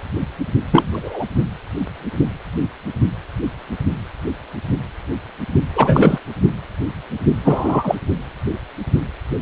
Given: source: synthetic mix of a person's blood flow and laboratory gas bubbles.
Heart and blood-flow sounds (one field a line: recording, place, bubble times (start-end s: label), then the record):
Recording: Doppler ultrasound of blood flow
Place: precordium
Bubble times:
0.72-1.25 s: bubbles
5.75-6.19 s: bubbles
7.44-7.96 s: bubbles
From the record:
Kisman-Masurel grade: 223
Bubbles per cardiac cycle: several, 3 to 8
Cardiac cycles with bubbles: 10 to 50%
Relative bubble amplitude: loud (0.450 to 0.775)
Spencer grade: 2 (many but less than half of the cardiac periods contain bubble signals, singularly or in groups)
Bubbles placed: only in the low amplitude regions of the cardiac cycle